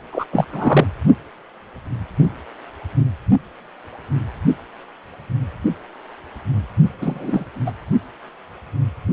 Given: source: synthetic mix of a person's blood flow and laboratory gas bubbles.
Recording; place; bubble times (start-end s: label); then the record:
Doppler ultrasound of blood flow; precordium
0.12-0.26 s: bubbles
0.32-0.44 s: bubbles
0.53-0.85 s: bubbles
7.01-7.45 s: bubbles
7.65-7.71 s: bubbles
From the record:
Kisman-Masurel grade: 223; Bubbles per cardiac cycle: several, 3 to 8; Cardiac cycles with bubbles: 10 to 50%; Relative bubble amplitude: loud (0.450 to 0.775); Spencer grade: 2 (many but less than half of the cardiac periods contain bubble signals, singularly or in groups); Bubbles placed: only in the low amplitude regions of the cardiac cycle